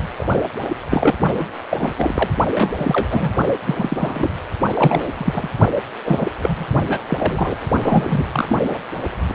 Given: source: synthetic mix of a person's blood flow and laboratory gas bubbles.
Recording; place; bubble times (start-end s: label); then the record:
Doppler ultrasound of blood flow; precordium
0.00-0.07 s: bubbles
0.17-0.42 s: bubbles
0.89-1.15 s: bubbles
1.34-1.47 s: bubbles
1.71-1.77 s: bubbles
1.80-1.94 s: bubbles
1.97-2.29 s: bubbles
2.54-3.31 s: bubbles
3.67-4.33 s: bubbles
4.75-5.49 s: bubbles
6.04-6.27 s: bubbles
6.40-6.66 s: bubbles
6.88-7.00 s: bubbles
7.07-7.55 s: bubbles
7.82-8.25 s: bubbles
8.32-8.79 s: bubbles
9.27-9.35 s: bubbles
From the record:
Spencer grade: 3 (all of the cardiac periods contain showers or single bubble signals, but not dominating or overriding the cardiac motion signals); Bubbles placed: only in the low amplitude regions of the cardiac cycle